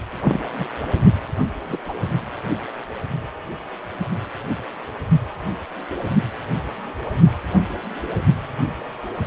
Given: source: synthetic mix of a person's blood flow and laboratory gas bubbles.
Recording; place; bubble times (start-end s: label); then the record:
Doppler ultrasound of blood flow; precordium
0.24-0.40 s: bubbles
0.58-0.65 s: bubbles
1.69-1.77 s: bubbles
1.88-1.94 s: bubbles
From the record:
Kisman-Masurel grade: 122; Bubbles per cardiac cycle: 1 to 2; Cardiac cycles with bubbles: 10 to 50%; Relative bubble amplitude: moderate (0.250 to 0.450); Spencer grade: 2 (many but less than half of the cardiac periods contain bubble signals, singularly or in groups); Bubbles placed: only in the low amplitude regions of the cardiac cycle